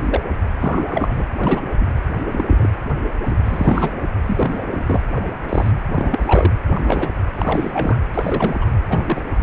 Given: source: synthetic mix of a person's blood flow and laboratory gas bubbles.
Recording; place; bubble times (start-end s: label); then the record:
Doppler ultrasound of blood flow; precordium
0.05-0.22 s: bubbles
0.60-1.26 s: bubbles
1.35-1.60 s: bubbles
1.79-1.86 s: bubbles
2.31-2.69 s: bubbles
3.25-3.35 s: bubbles
3.45-3.91 s: bubbles
4.27-4.84 s: bubbles
4.87-5.04 s: bubbles
5.18-5.27 s: bubbles
5.48-5.72 s: bubbles
5.91-6.53 s: bubbles
6.73-7.10 s: bubbles
7.36-7.97 s: bubbles
8.13-8.58 s: bubbles
8.61-8.65 s: bubbles
8.88-9.23 s: bubbles
From the record:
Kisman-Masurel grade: 242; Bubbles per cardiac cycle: several, 3 to 8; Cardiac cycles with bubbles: 100%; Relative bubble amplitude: moderate (0.250 to 0.450); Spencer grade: 3 (all of the cardiac periods contain showers or single bubble signals, but not dominating or overriding the cardiac motion signals); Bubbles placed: anywhere in the cardiac cycle